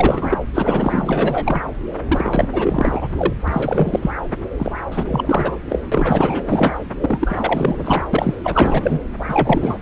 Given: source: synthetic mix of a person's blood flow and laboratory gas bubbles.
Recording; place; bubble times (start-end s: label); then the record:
Doppler ultrasound of blood flow; subclavian vein
0.00-0.38 s: bubbles
0.53-1.61 s: bubbles
2.08-2.50 s: bubbles
2.53-3.10 s: bubbles
3.17-3.33 s: bubbles
3.48-4.12 s: bubbles
4.58-4.73 s: bubbles
4.91-5.59 s: bubbles
5.69-5.79 s: bubbles
5.92-6.77 s: bubbles
7.00-7.75 s: bubbles
7.78-8.07 s: bubbles
8.13-8.34 s: bubbles
8.43-9.00 s: bubbles
9.28-9.78 s: bubbles
From the record:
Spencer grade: 4 (maximum detectable bubble signal sounding continuously throughout systole and diastole of every cardiac period, and overriding the amplitude of the normal cardiac signals); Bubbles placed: anywhere in the cardiac cycle